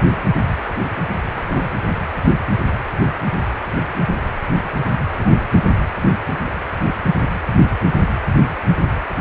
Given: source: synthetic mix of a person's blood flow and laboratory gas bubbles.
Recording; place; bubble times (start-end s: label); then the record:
Doppler ultrasound of blood flow; precordium
1.29-1.70 s: bubbles
3.02-3.07 s: bubbles
3.09-3.15 s: bubbles
5.19-5.44 s: bubbles
6.24-6.39 s: bubbles
From the record:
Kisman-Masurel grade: 121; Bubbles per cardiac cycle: 1 to 2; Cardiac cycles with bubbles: 10 to 50%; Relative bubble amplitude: barely perceptible (0.100 to 0.250); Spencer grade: 2 (many but less than half of the cardiac periods contain bubble signals, singularly or in groups); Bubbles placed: anywhere in the cardiac cycle